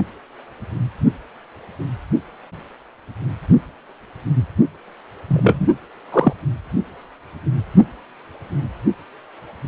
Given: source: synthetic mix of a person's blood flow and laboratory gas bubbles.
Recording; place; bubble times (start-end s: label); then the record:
Doppler ultrasound of blood flow; precordium
5.28-5.68 s: bubbles
6.12-6.33 s: bubbles
From the record:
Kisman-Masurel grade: 113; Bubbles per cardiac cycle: 1 to 2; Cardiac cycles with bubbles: 1 to 10%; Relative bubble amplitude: loud (0.450 to 0.775); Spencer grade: 1 (occasional bubble signal discernible with the cardiac motion signal, with majority of cardiac periods free of bubbles); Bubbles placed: only in the low amplitude regions of the cardiac cycle